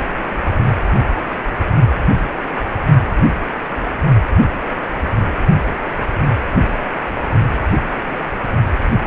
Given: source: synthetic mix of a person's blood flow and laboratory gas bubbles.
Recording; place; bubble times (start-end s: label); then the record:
Doppler ultrasound of blood flow; precordium
7.92-7.96 s: bubbles
8.08-8.17 s: bubbles
From the record:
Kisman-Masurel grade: 111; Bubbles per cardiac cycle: 1 to 2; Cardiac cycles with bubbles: 1 to 10%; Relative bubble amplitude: barely perceptible (0.100 to 0.250); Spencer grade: 1 (occasional bubble signal discernible with the cardiac motion signal, with majority of cardiac periods free of bubbles); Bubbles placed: only in the low amplitude regions of the cardiac cycle